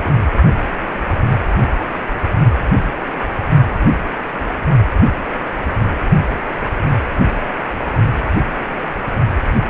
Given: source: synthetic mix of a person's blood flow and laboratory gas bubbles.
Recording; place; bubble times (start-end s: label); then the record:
Doppler ultrasound of blood flow; precordium
0.00-0.13 s: bubbles
From the record:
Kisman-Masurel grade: 221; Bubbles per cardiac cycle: several, 3 to 8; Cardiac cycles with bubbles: 10 to 50%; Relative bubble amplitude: barely perceptible (0.100 to 0.250); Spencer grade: 2 (many but less than half of the cardiac periods contain bubble signals, singularly or in groups); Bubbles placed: only in the low amplitude regions of the cardiac cycle